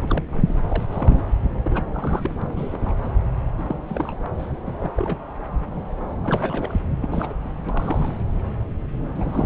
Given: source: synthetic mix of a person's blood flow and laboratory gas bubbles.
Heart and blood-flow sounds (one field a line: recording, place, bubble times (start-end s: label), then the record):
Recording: Doppler ultrasound of blood flow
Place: subclavian vein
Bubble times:
0.01-0.24 s: bubbles
0.32-0.55 s: bubbles
0.68-0.83 s: bubbles
0.92-1.22 s: bubbles
1.64-1.83 s: bubbles
1.93-2.31 s: bubbles
2.40-2.42 s: bubbles
2.56-2.78 s: bubbles
2.81-2.95 s: bubbles
3.02-3.12 s: bubbles
3.57-3.82 s: bubbles
3.88-4.12 s: bubbles
4.24-4.27 s: bubbles
4.38-4.46 s: bubbles
4.66-4.71 s: bubbles
4.78-4.92 s: bubbles
4.96-5.22 s: bubbles
6.22-6.81 s: bubbles
7.00-7.38 s: bubbles
7.69-8.12 s: bubbles
9.15-9.46 s: bubbles
From the record:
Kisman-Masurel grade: 232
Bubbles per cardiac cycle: several, 3 to 8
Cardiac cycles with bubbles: 50 to 99%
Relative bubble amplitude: moderate (0.250 to 0.450)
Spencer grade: 3 (all of the cardiac periods contain showers or single bubble signals, but not dominating or overriding the cardiac motion signals)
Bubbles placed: anywhere in the cardiac cycle